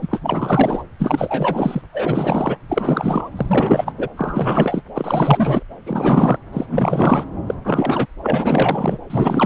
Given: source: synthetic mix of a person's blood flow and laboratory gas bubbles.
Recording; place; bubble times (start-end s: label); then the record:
Doppler ultrasound of blood flow; subclavian vein
0.01-0.83 s: bubbles
0.99-1.81 s: bubbles
1.93-2.56 s: bubbles
2.69-3.30 s: bubbles
3.37-3.92 s: bubbles
3.97-4.08 s: bubbles
4.17-4.82 s: bubbles
4.95-5.62 s: bubbles
5.86-6.38 s: bubbles
6.53-6.66 s: bubbles
6.69-7.25 s: bubbles
7.46-7.54 s: bubbles
7.64-8.06 s: bubbles
8.22-8.98 s: bubbles
9.10-9.46 s: bubbles
From the record:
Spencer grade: 4 (maximum detectable bubble signal sounding continuously throughout systole and diastole of every cardiac period, and overriding the amplitude of the normal cardiac signals); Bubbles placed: anywhere in the cardiac cycle